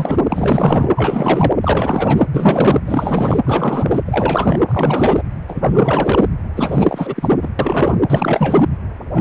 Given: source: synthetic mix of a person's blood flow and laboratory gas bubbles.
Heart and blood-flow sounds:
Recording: Doppler ultrasound of blood flow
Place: precordium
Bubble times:
0.00-0.17 s: bubbles
0.29-0.90 s: bubbles
0.96-1.52 s: bubbles
1.60-2.25 s: bubbles
2.35-2.81 s: bubbles
2.86-3.39 s: bubbles
3.45-4.00 s: bubbles
4.06-4.62 s: bubbles
4.67-5.22 s: bubbles
5.48-6.28 s: bubbles
6.56-7.29 s: bubbles
7.42-7.52 s: bubbles
7.59-7.96 s: bubbles
8.09-8.65 s: bubbles
9.13-9.21 s: bubbles
From the record:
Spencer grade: 4 (maximum detectable bubble signal sounding continuously throughout systole and diastole of every cardiac period, and overriding the amplitude of the normal cardiac signals)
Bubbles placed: anywhere in the cardiac cycle

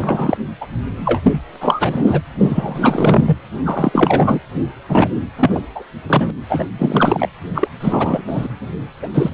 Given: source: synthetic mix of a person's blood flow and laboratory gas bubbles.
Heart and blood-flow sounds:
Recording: Doppler ultrasound of blood flow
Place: precordium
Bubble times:
0.00-0.38 s: bubbles
0.60-0.67 s: bubbles
1.05-1.21 s: bubbles
1.24-1.40 s: bubbles
1.55-1.57 s: bubbles
1.60-2.21 s: bubbles
2.38-3.36 s: bubbles
3.65-4.39 s: bubbles
4.88-5.08 s: bubbles
5.37-5.60 s: bubbles
5.75-5.84 s: bubbles
6.06-6.30 s: bubbles
6.49-6.70 s: bubbles
6.79-7.29 s: bubbles
7.54-7.67 s: bubbles
7.80-8.22 s: bubbles
8.27-8.47 s: bubbles
9.02-9.08 s: bubbles
9.13-9.30 s: bubbles
From the record:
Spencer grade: 3 (all of the cardiac periods contain showers or single bubble signals, but not dominating or overriding the cardiac motion signals)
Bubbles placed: anywhere in the cardiac cycle

